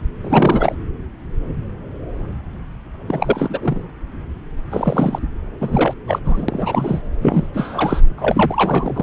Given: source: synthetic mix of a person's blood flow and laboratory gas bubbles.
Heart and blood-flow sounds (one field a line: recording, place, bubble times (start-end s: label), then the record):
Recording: Doppler ultrasound of blood flow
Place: subclavian vein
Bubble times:
0.21-0.75 s: bubbles
3.08-3.81 s: bubbles
4.71-5.19 s: bubbles
5.61-5.93 s: bubbles
6.07-6.19 s: bubbles
6.25-7.02 s: bubbles
7.21-7.47 s: bubbles
7.54-8.01 s: bubbles
8.17-9.03 s: bubbles
From the record:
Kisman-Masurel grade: 332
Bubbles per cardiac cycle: rolling drumbeat, 9 or more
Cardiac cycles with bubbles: 50 to 99%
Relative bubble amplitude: moderate (0.250 to 0.450)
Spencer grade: 3 (all of the cardiac periods contain showers or single bubble signals, but not dominating or overriding the cardiac motion signals)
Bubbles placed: anywhere in the cardiac cycle